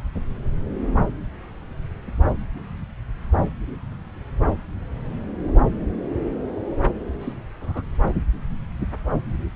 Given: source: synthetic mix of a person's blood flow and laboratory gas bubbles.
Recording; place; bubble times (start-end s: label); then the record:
Doppler ultrasound of blood flow; subclavian vein
7.19-7.33 s: bubbles
7.60-7.82 s: bubbles
From the record:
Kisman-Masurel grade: 111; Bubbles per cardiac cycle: 1 to 2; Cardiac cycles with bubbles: 1 to 10%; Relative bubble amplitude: barely perceptible (0.100 to 0.250); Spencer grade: 1 (occasional bubble signal discernible with the cardiac motion signal, with majority of cardiac periods free of bubbles); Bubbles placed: anywhere in the cardiac cycle